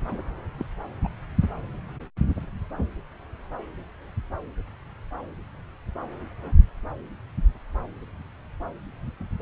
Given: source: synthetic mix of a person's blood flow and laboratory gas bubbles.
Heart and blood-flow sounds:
Doppler ultrasound of blood flow; subclavian vein
0.11-0.22 s: bubbles
0.58-0.66 s: bubbles
1.03-1.08 s: bubbles
From the record:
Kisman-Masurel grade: 211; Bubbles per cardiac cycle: several, 3 to 8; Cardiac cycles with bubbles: 1 to 10%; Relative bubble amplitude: barely perceptible (0.100 to 0.250); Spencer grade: 1 (occasional bubble signal discernible with the cardiac motion signal, with majority of cardiac periods free of bubbles); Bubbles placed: anywhere in the cardiac cycle

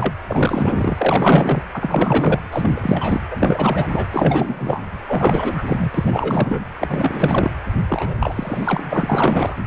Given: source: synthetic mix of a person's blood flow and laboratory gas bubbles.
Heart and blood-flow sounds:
Doppler ultrasound of blood flow; precordium
0.00-0.14 s: bubbles
0.28-1.61 s: bubbles
1.73-2.43 s: bubbles
2.52-3.21 s: bubbles
3.31-3.89 s: bubbles
3.92-4.05 s: bubbles
4.10-4.83 s: bubbles
5.05-5.54 s: bubbles
5.57-5.63 s: bubbles
5.67-5.90 s: bubbles
5.94-6.66 s: bubbles
6.79-7.51 s: bubbles
7.88-8.15 s: bubbles
8.19-8.84 s: bubbles
8.90-9.57 s: bubbles
From the record:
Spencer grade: 4 (maximum detectable bubble signal sounding continuously throughout systole and diastole of every cardiac period, and overriding the amplitude of the normal cardiac signals); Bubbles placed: anywhere in the cardiac cycle

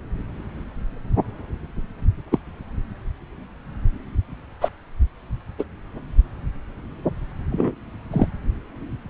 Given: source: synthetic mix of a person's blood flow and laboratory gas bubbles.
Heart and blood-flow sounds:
Doppler ultrasound of blood flow; subclavian vein
2.31-2.39 s: bubbles
4.61-4.69 s: bubbles
5.58-5.64 s: bubbles
7.52-7.72 s: bubbles
8.12-8.28 s: bubbles
From the record:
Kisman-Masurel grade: 123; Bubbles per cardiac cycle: 1 to 2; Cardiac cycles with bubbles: 10 to 50%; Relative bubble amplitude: loud (0.450 to 0.775); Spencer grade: 2 (many but less than half of the cardiac periods contain bubble signals, singularly or in groups); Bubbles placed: anywhere in the cardiac cycle

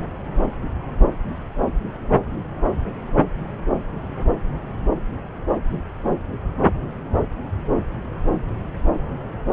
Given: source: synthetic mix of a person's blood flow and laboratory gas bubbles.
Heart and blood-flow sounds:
Doppler ultrasound of blood flow; subclavian vein
no bubbles
From the record:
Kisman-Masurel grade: 000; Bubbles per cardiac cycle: 0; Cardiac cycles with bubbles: 0%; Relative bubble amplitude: no bubbles discernible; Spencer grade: 0 (complete lack of bubble signals)

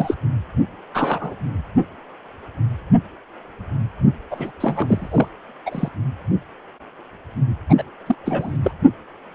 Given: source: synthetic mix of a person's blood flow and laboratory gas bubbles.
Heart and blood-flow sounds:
Doppler ultrasound of blood flow; precordium
0.00-0.15 s: bubbles
0.94-1.36 s: bubbles
4.30-4.51 s: bubbles
4.60-5.29 s: bubbles
5.66-5.88 s: bubbles
7.69-7.74 s: bubbles
7.78-7.83 s: bubbles
8.06-8.15 s: bubbles
8.20-8.57 s: bubbles
8.63-8.71 s: bubbles
From the record:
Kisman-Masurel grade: 222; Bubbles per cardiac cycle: several, 3 to 8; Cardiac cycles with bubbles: 10 to 50%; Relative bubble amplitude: moderate (0.250 to 0.450); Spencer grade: 2 (many but less than half of the cardiac periods contain bubble signals, singularly or in groups); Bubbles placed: only in the low amplitude regions of the cardiac cycle

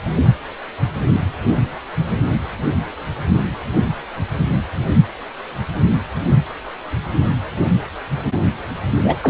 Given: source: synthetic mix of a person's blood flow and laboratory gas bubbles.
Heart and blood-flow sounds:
Doppler ultrasound of blood flow; precordium
9.04-9.16 s: bubbles
9.23-9.30 s: bubbles
From the record:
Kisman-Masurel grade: 213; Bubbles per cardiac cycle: several, 3 to 8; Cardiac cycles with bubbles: 1 to 10%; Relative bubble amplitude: loud (0.450 to 0.775); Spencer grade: 1 (occasional bubble signal discernible with the cardiac motion signal, with majority of cardiac periods free of bubbles); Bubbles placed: anywhere in the cardiac cycle

